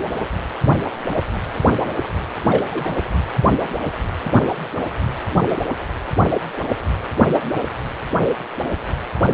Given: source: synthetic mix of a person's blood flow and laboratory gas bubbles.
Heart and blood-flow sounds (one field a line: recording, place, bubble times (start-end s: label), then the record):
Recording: Doppler ultrasound of blood flow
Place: precordium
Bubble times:
0.96-1.24 s: bubbles
1.72-1.78 s: bubbles
2.48-2.66 s: bubbles
2.71-2.94 s: bubbles
5.39-5.57 s: bubbles
From the record:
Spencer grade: 2 (many but less than half of the cardiac periods contain bubble signals, singularly or in groups)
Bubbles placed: anywhere in the cardiac cycle